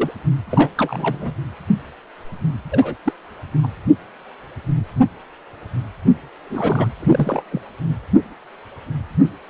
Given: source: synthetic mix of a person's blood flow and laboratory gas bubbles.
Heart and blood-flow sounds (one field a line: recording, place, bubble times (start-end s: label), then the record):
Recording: Doppler ultrasound of blood flow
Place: precordium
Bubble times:
0.00-0.11 s: bubbles
0.50-0.70 s: bubbles
0.77-1.34 s: bubbles
2.71-2.95 s: bubbles
3.05-3.12 s: bubbles
3.63-3.67 s: bubbles
6.43-6.89 s: bubbles
7.00-7.42 s: bubbles
7.51-7.61 s: bubbles
From the record:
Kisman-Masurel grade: 222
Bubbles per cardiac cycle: several, 3 to 8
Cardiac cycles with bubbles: 10 to 50%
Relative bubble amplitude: moderate (0.250 to 0.450)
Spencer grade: 2 (many but less than half of the cardiac periods contain bubble signals, singularly or in groups)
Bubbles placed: anywhere in the cardiac cycle